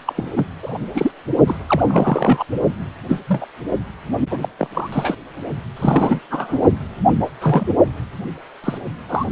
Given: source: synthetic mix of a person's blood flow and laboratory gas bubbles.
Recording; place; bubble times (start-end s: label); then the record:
Doppler ultrasound of blood flow; precordium
0.06-0.13 s: bubbles
0.16-0.45 s: bubbles
0.62-0.78 s: bubbles
0.94-1.11 s: bubbles
1.47-1.59 s: bubbles
1.67-2.43 s: bubbles
3.08-3.21 s: bubbles
3.27-3.46 s: bubbles
4.30-4.39 s: bubbles
4.42-4.49 s: bubbles
4.58-4.68 s: bubbles
4.74-4.90 s: bubbles
4.92-5.15 s: bubbles
5.77-6.20 s: bubbles
6.30-6.62 s: bubbles
7.41-7.67 s: bubbles
8.63-8.78 s: bubbles
9.09-9.26 s: bubbles
From the record:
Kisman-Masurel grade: 243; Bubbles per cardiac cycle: several, 3 to 8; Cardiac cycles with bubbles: 100%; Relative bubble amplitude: loud (0.450 to 0.775); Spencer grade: 3 (all of the cardiac periods contain showers or single bubble signals, but not dominating or overriding the cardiac motion signals); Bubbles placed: only in the low amplitude regions of the cardiac cycle